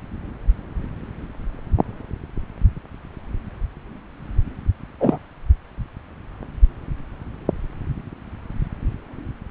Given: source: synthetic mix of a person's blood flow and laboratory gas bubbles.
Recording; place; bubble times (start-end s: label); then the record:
Doppler ultrasound of blood flow; subclavian vein
5.00-5.18 s: bubbles
From the record:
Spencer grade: 1 (occasional bubble signal discernible with the cardiac motion signal, with majority of cardiac periods free of bubbles); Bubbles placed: anywhere in the cardiac cycle